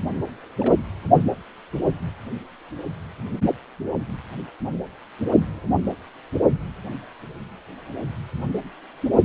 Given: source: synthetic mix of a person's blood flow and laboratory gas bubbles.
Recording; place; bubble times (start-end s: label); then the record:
Doppler ultrasound of blood flow; precordium
0.59-0.74 s: bubbles
From the record:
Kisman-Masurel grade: 111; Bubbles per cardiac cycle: 1 to 2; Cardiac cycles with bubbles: 1 to 10%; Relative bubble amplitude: barely perceptible (0.100 to 0.250); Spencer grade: 1 (occasional bubble signal discernible with the cardiac motion signal, with majority of cardiac periods free of bubbles); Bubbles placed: only in the low amplitude regions of the cardiac cycle